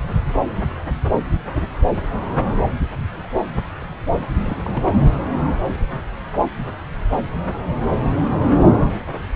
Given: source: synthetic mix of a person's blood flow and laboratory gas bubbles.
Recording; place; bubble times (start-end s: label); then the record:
Doppler ultrasound of blood flow; subclavian vein
4.40-4.71 s: bubbles
4.73-4.94 s: bubbles
From the record:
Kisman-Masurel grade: 221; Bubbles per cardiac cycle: several, 3 to 8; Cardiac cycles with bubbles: 10 to 50%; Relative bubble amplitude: barely perceptible (0.100 to 0.250); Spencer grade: 2 (many but less than half of the cardiac periods contain bubble signals, singularly or in groups); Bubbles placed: anywhere in the cardiac cycle